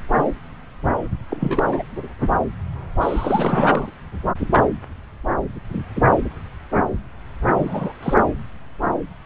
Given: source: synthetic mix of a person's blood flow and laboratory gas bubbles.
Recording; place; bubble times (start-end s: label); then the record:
Doppler ultrasound of blood flow; subclavian vein
1.29-1.83 s: bubbles
3.00-3.92 s: bubbles
7.57-7.92 s: bubbles
8.03-8.14 s: bubbles
From the record:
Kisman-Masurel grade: 222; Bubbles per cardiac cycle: several, 3 to 8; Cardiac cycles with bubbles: 10 to 50%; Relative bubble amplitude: moderate (0.250 to 0.450); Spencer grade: 2 (many but less than half of the cardiac periods contain bubble signals, singularly or in groups); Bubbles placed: anywhere in the cardiac cycle